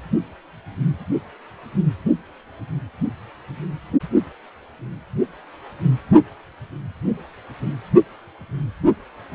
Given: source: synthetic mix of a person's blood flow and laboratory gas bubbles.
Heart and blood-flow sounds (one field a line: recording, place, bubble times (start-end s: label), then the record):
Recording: Doppler ultrasound of blood flow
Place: precordium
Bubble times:
no bubbles
From the record:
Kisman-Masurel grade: 000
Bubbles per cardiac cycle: 0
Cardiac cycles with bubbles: 0%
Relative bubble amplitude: no bubbles discernible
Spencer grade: 0 (complete lack of bubble signals)